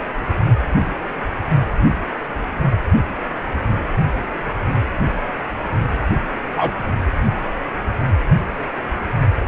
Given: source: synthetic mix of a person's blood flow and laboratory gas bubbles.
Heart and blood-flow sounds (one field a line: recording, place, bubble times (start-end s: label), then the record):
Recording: Doppler ultrasound of blood flow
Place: precordium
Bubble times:
6.56-6.71 s: bubbles
From the record:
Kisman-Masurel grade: 113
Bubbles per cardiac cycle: 1 to 2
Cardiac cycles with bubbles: 1 to 10%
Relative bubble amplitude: loud (0.450 to 0.775)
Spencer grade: 1 (occasional bubble signal discernible with the cardiac motion signal, with majority of cardiac periods free of bubbles)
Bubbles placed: anywhere in the cardiac cycle